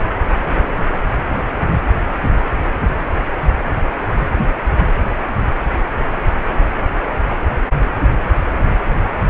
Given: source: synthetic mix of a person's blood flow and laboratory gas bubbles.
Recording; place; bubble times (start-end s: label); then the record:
Doppler ultrasound of blood flow; precordium
no bubbles
From the record:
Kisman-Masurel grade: 000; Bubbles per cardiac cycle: 0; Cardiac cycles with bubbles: 0%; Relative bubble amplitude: no bubbles discernible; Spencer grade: 0 (complete lack of bubble signals)